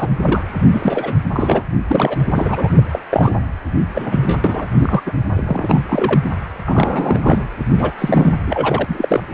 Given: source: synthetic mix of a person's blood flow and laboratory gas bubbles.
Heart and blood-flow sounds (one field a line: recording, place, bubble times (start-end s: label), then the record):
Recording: Doppler ultrasound of blood flow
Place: precordium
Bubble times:
0.00-0.08 s: bubbles
0.19-0.58 s: bubbles
0.71-1.15 s: bubbles
1.32-1.63 s: bubbles
1.87-2.26 s: bubbles
2.34-2.82 s: bubbles
2.92-3.00 s: bubbles
3.09-3.34 s: bubbles
3.93-4.39 s: bubbles
4.44-4.66 s: bubbles
4.79-5.01 s: bubbles
5.05-5.13 s: bubbles
5.35-5.83 s: bubbles
5.89-6.20 s: bubbles
6.65-7.46 s: bubbles
7.77-7.92 s: bubbles
7.99-8.36 s: bubbles
8.46-8.85 s: bubbles
8.88-9.24 s: bubbles
From the record:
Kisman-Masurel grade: 232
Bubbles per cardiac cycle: several, 3 to 8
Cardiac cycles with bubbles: 50 to 99%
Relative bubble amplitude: moderate (0.250 to 0.450)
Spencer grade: 3 (all of the cardiac periods contain showers or single bubble signals, but not dominating or overriding the cardiac motion signals)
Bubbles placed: anywhere in the cardiac cycle